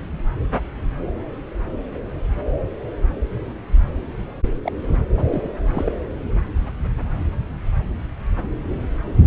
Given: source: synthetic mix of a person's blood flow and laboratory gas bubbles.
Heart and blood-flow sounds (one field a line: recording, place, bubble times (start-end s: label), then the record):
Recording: Doppler ultrasound of blood flow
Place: subclavian vein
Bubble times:
4.64-4.71 s: bubbles
5.17-5.25 s: bubbles
5.31-5.50 s: bubbles
5.73-5.92 s: bubbles
From the record:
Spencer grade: 1 (occasional bubble signal discernible with the cardiac motion signal, with majority of cardiac periods free of bubbles)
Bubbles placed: anywhere in the cardiac cycle